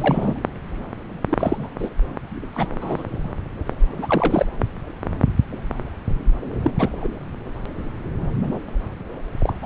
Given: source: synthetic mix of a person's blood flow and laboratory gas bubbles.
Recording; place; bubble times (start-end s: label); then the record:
Doppler ultrasound of blood flow; subclavian vein
0.00-0.35 s: bubbles
1.29-1.68 s: bubbles
1.79-1.90 s: bubbles
2.52-2.67 s: bubbles
2.80-3.04 s: bubbles
4.01-4.46 s: bubbles
6.62-6.72 s: bubbles
6.79-6.89 s: bubbles
7.00-7.08 s: bubbles
9.39-9.53 s: bubbles
9.62-9.66 s: bubbles
From the record:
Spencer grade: 2 (many but less than half of the cardiac periods contain bubble signals, singularly or in groups); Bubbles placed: anywhere in the cardiac cycle